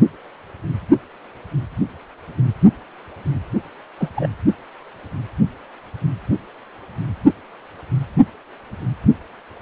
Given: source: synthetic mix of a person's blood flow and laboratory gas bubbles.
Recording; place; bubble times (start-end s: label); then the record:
Doppler ultrasound of blood flow; precordium
3.99-4.08 s: bubbles
4.16-4.28 s: bubbles
From the record:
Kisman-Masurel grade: 112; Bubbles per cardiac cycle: 1 to 2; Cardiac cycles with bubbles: 1 to 10%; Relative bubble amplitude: moderate (0.250 to 0.450); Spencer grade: 1 (occasional bubble signal discernible with the cardiac motion signal, with majority of cardiac periods free of bubbles); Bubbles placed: only in the low amplitude regions of the cardiac cycle